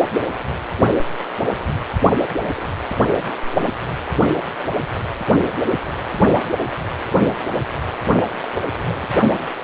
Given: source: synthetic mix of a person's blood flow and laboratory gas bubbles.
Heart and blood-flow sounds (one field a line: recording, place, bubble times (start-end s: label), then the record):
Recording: Doppler ultrasound of blood flow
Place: precordium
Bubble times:
2.44-2.49 s: bubbles
2.56-2.67 s: bubbles
3.22-3.69 s: bubbles
8.77-9.12 s: bubbles
From the record:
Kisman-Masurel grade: 121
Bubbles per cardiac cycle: 1 to 2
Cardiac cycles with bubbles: 10 to 50%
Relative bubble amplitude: barely perceptible (0.100 to 0.250)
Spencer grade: 2 (many but less than half of the cardiac periods contain bubble signals, singularly or in groups)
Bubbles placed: only in the low amplitude regions of the cardiac cycle